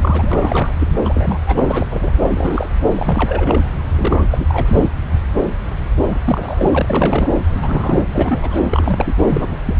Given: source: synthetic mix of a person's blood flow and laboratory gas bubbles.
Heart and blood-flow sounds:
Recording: Doppler ultrasound of blood flow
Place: subclavian vein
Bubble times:
0.02-0.73 s: bubbles
0.80-0.88 s: bubbles
1.04-1.40 s: bubbles
1.47-2.13 s: bubbles
2.21-2.69 s: bubbles
2.95-3.61 s: bubbles
3.95-4.25 s: bubbles
4.30-4.90 s: bubbles
6.12-6.19 s: bubbles
6.25-7.31 s: bubbles
7.60-8.05 s: bubbles
8.10-8.61 s: bubbles
8.71-9.14 s: bubbles
9.18-9.22 s: bubbles
9.30-9.46 s: bubbles
9.49-9.59 s: bubbles
9.65-9.76 s: bubbles
From the record:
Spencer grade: 3 (all of the cardiac periods contain showers or single bubble signals, but not dominating or overriding the cardiac motion signals)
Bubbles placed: anywhere in the cardiac cycle

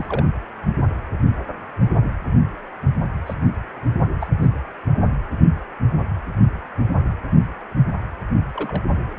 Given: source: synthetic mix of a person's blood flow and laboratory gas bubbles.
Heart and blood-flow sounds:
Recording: Doppler ultrasound of blood flow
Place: precordium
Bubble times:
0.00-0.26 s: bubbles
3.26-3.34 s: bubbles
4.21-4.27 s: bubbles
4.39-4.49 s: bubbles
8.56-8.81 s: bubbles
From the record:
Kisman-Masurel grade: 121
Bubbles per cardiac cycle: 1 to 2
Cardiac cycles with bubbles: 10 to 50%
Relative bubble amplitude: barely perceptible (0.100 to 0.250)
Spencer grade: 2 (many but less than half of the cardiac periods contain bubble signals, singularly or in groups)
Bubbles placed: anywhere in the cardiac cycle

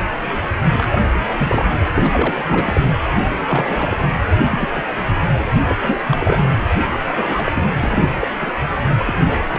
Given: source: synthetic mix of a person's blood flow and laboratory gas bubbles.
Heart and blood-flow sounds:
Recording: Doppler ultrasound of blood flow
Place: precordium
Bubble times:
0.78-0.98 s: bubbles
1.39-1.64 s: bubbles
1.94-2.81 s: bubbles
3.47-3.97 s: bubbles
4.44-4.68 s: bubbles
4.74-4.88 s: bubbles
5.67-5.75 s: bubbles
5.80-6.01 s: bubbles
6.06-6.45 s: bubbles
7.05-7.52 s: bubbles
7.55-7.64 s: bubbles
7.79-8.13 s: bubbles
8.20-8.28 s: bubbles
8.40-8.52 s: bubbles
9.06-9.13 s: bubbles
9.27-9.44 s: bubbles
9.48-9.58 s: bubbles
From the record:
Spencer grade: 3 (all of the cardiac periods contain showers or single bubble signals, but not dominating or overriding the cardiac motion signals)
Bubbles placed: anywhere in the cardiac cycle

